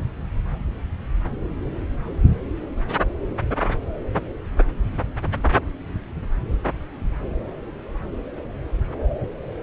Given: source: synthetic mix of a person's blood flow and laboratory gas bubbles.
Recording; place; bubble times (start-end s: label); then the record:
Doppler ultrasound of blood flow; subclavian vein
no bubbles
From the record:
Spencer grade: 0 (complete lack of bubble signals)